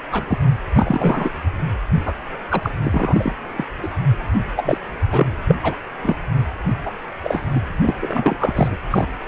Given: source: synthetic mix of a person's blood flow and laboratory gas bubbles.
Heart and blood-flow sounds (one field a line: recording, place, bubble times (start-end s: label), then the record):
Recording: Doppler ultrasound of blood flow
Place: precordium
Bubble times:
0.11-0.24 s: bubbles
0.28-0.38 s: bubbles
0.75-1.31 s: bubbles
2.05-2.14 s: bubbles
2.51-2.70 s: bubbles
2.85-3.33 s: bubbles
3.57-3.64 s: bubbles
3.82-3.88 s: bubbles
4.56-4.77 s: bubbles
5.10-5.35 s: bubbles
5.48-5.55 s: bubbles
5.62-5.76 s: bubbles
6.02-6.15 s: bubbles
6.85-6.91 s: bubbles
7.22-7.62 s: bubbles
7.81-7.95 s: bubbles
8.01-8.76 s: bubbles
8.91-9.06 s: bubbles
From the record:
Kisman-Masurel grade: 242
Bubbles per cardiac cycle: several, 3 to 8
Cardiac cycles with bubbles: 100%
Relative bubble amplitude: moderate (0.250 to 0.450)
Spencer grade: 3 (all of the cardiac periods contain showers or single bubble signals, but not dominating or overriding the cardiac motion signals)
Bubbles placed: anywhere in the cardiac cycle